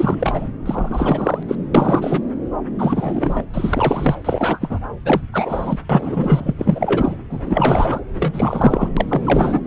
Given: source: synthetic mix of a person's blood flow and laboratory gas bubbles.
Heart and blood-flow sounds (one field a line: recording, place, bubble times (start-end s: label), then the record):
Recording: Doppler ultrasound of blood flow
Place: subclavian vein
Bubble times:
0.00-0.48 s: bubbles
0.66-1.43 s: bubbles
1.48-1.55 s: bubbles
1.74-2.22 s: bubbles
2.79-3.43 s: bubbles
3.54-4.15 s: bubbles
4.24-4.58 s: bubbles
4.61-4.79 s: bubbles
5.05-5.21 s: bubbles
5.33-5.79 s: bubbles
5.89-6.54 s: bubbles
6.58-7.17 s: bubbles
7.29-8.04 s: bubbles
8.16-8.89 s: bubbles
8.96-9.61 s: bubbles
From the record:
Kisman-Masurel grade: 343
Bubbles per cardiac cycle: rolling drumbeat, 9 or more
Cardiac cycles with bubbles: 100%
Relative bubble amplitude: loud (0.450 to 0.775)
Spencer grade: 3 (all of the cardiac periods contain showers or single bubble signals, but not dominating or overriding the cardiac motion signals)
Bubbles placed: anywhere in the cardiac cycle